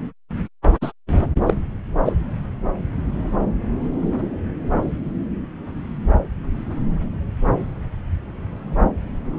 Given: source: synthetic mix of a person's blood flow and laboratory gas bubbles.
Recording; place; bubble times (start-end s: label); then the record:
Doppler ultrasound of blood flow; subclavian vein
0.81-0.92 s: bubbles
1.47-1.53 s: bubbles
2.05-2.12 s: bubbles
From the record:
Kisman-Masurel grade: 123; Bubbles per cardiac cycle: 1 to 2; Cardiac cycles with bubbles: 10 to 50%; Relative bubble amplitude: loud (0.450 to 0.775); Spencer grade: 2 (many but less than half of the cardiac periods contain bubble signals, singularly or in groups); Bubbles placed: anywhere in the cardiac cycle